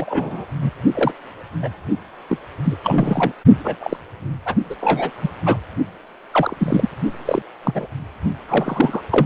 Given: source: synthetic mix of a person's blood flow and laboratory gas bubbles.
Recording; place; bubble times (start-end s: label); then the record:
Doppler ultrasound of blood flow; precordium
0.00-0.46 s: bubbles
0.61-0.70 s: bubbles
0.94-1.12 s: bubbles
1.62-1.69 s: bubbles
2.28-2.38 s: bubbles
2.65-2.76 s: bubbles
2.83-3.32 s: bubbles
3.64-3.76 s: bubbles
3.80-3.97 s: bubbles
4.45-4.55 s: bubbles
4.70-4.75 s: bubbles
4.80-5.10 s: bubbles
5.21-5.29 s: bubbles
5.45-5.57 s: bubbles
6.31-6.89 s: bubbles
7.25-7.42 s: bubbles
7.64-7.86 s: bubbles
8.48-9.01 s: bubbles
9.11-9.26 s: bubbles
From the record:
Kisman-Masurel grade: 232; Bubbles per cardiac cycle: several, 3 to 8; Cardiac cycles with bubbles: 50 to 99%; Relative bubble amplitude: moderate (0.250 to 0.450); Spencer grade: 3 (all of the cardiac periods contain showers or single bubble signals, but not dominating or overriding the cardiac motion signals); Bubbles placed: only in the low amplitude regions of the cardiac cycle